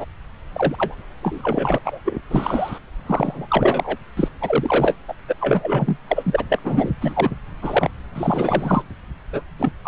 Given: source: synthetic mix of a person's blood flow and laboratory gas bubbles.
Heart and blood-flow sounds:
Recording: Doppler ultrasound of blood flow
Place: subclavian vein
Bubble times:
0.00-0.05 s: bubbles
0.53-0.75 s: bubbles
0.78-0.95 s: bubbles
1.22-1.78 s: bubbles
1.84-1.99 s: bubbles
2.05-2.21 s: bubbles
2.30-2.79 s: bubbles
3.06-3.97 s: bubbles
4.17-4.29 s: bubbles
4.40-4.97 s: bubbles
5.07-5.14 s: bubbles
5.28-5.35 s: bubbles
5.39-5.98 s: bubbles
6.07-6.44 s: bubbles
6.48-6.59 s: bubbles
6.64-6.92 s: bubbles
7.00-7.31 s: bubbles
7.61-7.88 s: bubbles
8.15-8.82 s: bubbles
9.32-9.41 s: bubbles
9.58-9.71 s: bubbles
9.84-9.88 s: bubbles
From the record:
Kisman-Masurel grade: 343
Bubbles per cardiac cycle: rolling drumbeat, 9 or more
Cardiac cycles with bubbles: 100%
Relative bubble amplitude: loud (0.450 to 0.775)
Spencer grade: 3 (all of the cardiac periods contain showers or single bubble signals, but not dominating or overriding the cardiac motion signals)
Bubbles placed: anywhere in the cardiac cycle

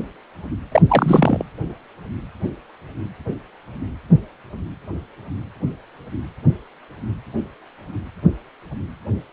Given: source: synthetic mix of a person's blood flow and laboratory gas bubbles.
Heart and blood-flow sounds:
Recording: Doppler ultrasound of blood flow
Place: precordium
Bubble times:
0.71-0.82 s: bubbles
0.89-1.43 s: bubbles
From the record:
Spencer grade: 1 (occasional bubble signal discernible with the cardiac motion signal, with majority of cardiac periods free of bubbles)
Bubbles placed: anywhere in the cardiac cycle

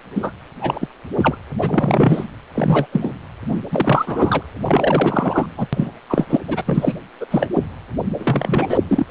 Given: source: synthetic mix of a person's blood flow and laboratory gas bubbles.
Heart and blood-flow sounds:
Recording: Doppler ultrasound of blood flow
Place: precordium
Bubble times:
0.15-0.31 s: bubbles
0.59-0.88 s: bubbles
1.17-1.37 s: bubbles
1.59-2.24 s: bubbles
2.55-2.87 s: bubbles
2.92-3.11 s: bubbles
3.49-3.61 s: bubbles
3.71-4.42 s: bubbles
4.64-5.46 s: bubbles
5.57-5.67 s: bubbles
5.73-5.91 s: bubbles
6.10-6.25 s: bubbles
6.29-6.37 s: bubbles
6.47-6.63 s: bubbles
6.66-6.94 s: bubbles
7.20-7.26 s: bubbles
7.31-7.49 s: bubbles
7.53-7.67 s: bubbles
8.17-8.79 s: bubbles
8.88-9.06 s: bubbles
From the record:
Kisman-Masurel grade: 243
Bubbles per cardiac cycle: several, 3 to 8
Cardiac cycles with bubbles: 100%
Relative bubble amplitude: loud (0.450 to 0.775)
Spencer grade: 3 (all of the cardiac periods contain showers or single bubble signals, but not dominating or overriding the cardiac motion signals)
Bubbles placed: anywhere in the cardiac cycle

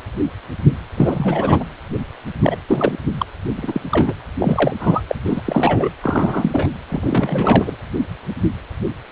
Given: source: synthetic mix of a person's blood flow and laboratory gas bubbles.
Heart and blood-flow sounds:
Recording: Doppler ultrasound of blood flow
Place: precordium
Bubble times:
0.96-1.65 s: bubbles
2.42-2.56 s: bubbles
2.69-2.98 s: bubbles
3.18-3.26 s: bubbles
3.58-3.81 s: bubbles
3.92-4.14 s: bubbles
4.39-4.76 s: bubbles
4.79-5.01 s: bubbles
5.09-5.15 s: bubbles
5.24-5.41 s: bubbles
5.44-5.89 s: bubbles
6.02-6.67 s: bubbles
6.88-7.76 s: bubbles
From the record:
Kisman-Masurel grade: 332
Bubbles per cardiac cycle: rolling drumbeat, 9 or more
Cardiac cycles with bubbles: 50 to 99%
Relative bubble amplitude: moderate (0.250 to 0.450)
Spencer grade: 3 (all of the cardiac periods contain showers or single bubble signals, but not dominating or overriding the cardiac motion signals)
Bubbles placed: anywhere in the cardiac cycle

